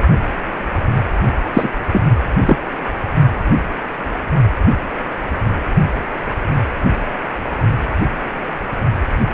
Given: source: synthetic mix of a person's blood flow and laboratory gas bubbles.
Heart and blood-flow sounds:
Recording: Doppler ultrasound of blood flow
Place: precordium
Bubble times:
1.53-1.69 s: bubbles
1.92-2.02 s: bubbles
2.40-2.56 s: bubbles
From the record:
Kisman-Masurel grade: 223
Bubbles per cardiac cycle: several, 3 to 8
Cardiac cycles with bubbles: 10 to 50%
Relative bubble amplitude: loud (0.450 to 0.775)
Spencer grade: 2 (many but less than half of the cardiac periods contain bubble signals, singularly or in groups)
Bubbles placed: only in the low amplitude regions of the cardiac cycle

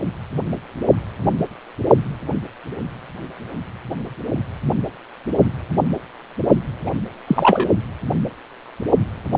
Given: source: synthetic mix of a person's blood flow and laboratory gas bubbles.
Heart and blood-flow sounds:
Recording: Doppler ultrasound of blood flow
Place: precordium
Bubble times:
6.84-6.94 s: bubbles
7.27-7.69 s: bubbles
From the record:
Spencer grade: 2 (many but less than half of the cardiac periods contain bubble signals, singularly or in groups)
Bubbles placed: only in the low amplitude regions of the cardiac cycle

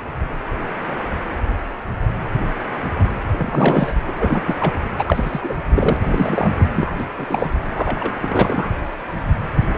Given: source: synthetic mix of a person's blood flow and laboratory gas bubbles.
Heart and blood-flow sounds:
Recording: Doppler ultrasound of blood flow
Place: precordium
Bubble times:
3.31-3.94 s: bubbles
4.07-4.56 s: bubbles
4.60-4.74 s: bubbles
4.98-5.41 s: bubbles
5.43-5.54 s: bubbles
5.75-5.97 s: bubbles
6.02-6.56 s: bubbles
6.58-6.67 s: bubbles
6.76-6.92 s: bubbles
6.98-7.06 s: bubbles
7.18-7.26 s: bubbles
7.29-7.49 s: bubbles
7.75-8.13 s: bubbles
8.21-8.72 s: bubbles
From the record:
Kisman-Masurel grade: 333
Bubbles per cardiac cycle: rolling drumbeat, 9 or more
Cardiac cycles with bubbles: 50 to 99%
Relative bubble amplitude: loud (0.450 to 0.775)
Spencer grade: 3 (all of the cardiac periods contain showers or single bubble signals, but not dominating or overriding the cardiac motion signals)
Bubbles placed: anywhere in the cardiac cycle

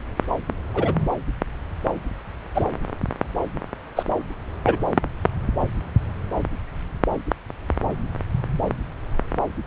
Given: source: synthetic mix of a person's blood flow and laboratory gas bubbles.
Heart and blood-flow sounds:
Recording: Doppler ultrasound of blood flow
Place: subclavian vein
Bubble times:
0.73-0.94 s: bubbles
2.54-2.65 s: bubbles
3.96-4.03 s: bubbles
4.65-4.76 s: bubbles
From the record:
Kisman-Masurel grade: 123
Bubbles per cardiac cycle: 1 to 2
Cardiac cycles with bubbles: 10 to 50%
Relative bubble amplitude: loud (0.450 to 0.775)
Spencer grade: 2 (many but less than half of the cardiac periods contain bubble signals, singularly or in groups)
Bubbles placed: anywhere in the cardiac cycle

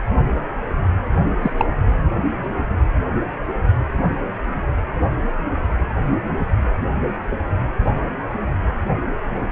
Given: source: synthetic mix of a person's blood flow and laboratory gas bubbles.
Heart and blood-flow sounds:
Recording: Doppler ultrasound of blood flow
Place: precordium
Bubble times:
1.40-1.51 s: bubbles
1.57-1.65 s: bubbles
From the record:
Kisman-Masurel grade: 122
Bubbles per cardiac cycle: 1 to 2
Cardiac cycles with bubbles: 10 to 50%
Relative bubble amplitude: moderate (0.250 to 0.450)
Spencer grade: 2 (many but less than half of the cardiac periods contain bubble signals, singularly or in groups)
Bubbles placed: anywhere in the cardiac cycle

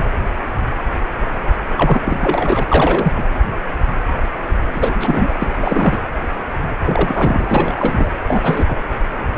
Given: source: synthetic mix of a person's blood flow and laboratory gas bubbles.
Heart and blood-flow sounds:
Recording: Doppler ultrasound of blood flow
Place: precordium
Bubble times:
0.00-0.04 s: bubbles
1.75-2.02 s: bubbles
2.05-2.64 s: bubbles
2.68-3.12 s: bubbles
3.16-3.23 s: bubbles
4.72-5.33 s: bubbles
5.39-5.99 s: bubbles
6.84-7.45 s: bubbles
7.49-8.12 s: bubbles
8.28-8.65 s: bubbles
8.68-8.75 s: bubbles
From the record:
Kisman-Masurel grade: 333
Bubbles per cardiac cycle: rolling drumbeat, 9 or more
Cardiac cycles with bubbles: 50 to 99%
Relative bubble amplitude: loud (0.450 to 0.775)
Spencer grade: 3 (all of the cardiac periods contain showers or single bubble signals, but not dominating or overriding the cardiac motion signals)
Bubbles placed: anywhere in the cardiac cycle

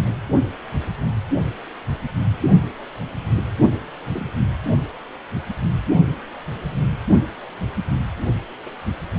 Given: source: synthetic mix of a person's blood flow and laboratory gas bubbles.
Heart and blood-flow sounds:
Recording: Doppler ultrasound of blood flow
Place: precordium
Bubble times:
4.13-4.30 s: bubbles
8.66-8.70 s: bubbles
From the record:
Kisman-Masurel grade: 121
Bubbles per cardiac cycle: 1 to 2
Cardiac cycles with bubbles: 10 to 50%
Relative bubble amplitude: barely perceptible (0.100 to 0.250)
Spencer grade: 2 (many but less than half of the cardiac periods contain bubble signals, singularly or in groups)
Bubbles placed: only in the low amplitude regions of the cardiac cycle

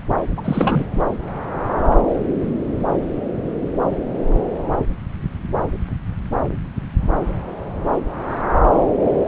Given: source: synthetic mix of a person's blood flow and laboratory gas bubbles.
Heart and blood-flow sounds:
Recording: Doppler ultrasound of blood flow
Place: subclavian vein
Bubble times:
0.37-0.84 s: bubbles
From the record:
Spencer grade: 1 (occasional bubble signal discernible with the cardiac motion signal, with majority of cardiac periods free of bubbles)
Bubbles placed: anywhere in the cardiac cycle

